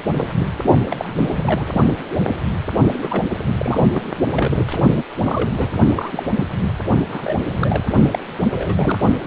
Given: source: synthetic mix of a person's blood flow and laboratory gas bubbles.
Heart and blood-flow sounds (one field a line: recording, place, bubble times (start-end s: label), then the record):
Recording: Doppler ultrasound of blood flow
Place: precordium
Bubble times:
0.05-0.31 s: bubbles
0.39-0.47 s: bubbles
0.90-1.14 s: bubbles
1.17-1.88 s: bubbles
3.02-3.24 s: bubbles
3.57-3.85 s: bubbles
3.93-4.02 s: bubbles
4.37-4.58 s: bubbles
4.69-5.03 s: bubbles
5.23-5.72 s: bubbles
5.96-6.25 s: bubbles
6.36-6.48 s: bubbles
7.06-7.36 s: bubbles
7.53-7.88 s: bubbles
8.12-8.19 s: bubbles
8.49-8.99 s: bubbles
From the record:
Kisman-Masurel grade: 242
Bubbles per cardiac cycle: several, 3 to 8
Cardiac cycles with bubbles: 100%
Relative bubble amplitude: moderate (0.250 to 0.450)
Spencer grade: 3 (all of the cardiac periods contain showers or single bubble signals, but not dominating or overriding the cardiac motion signals)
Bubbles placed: only in the low amplitude regions of the cardiac cycle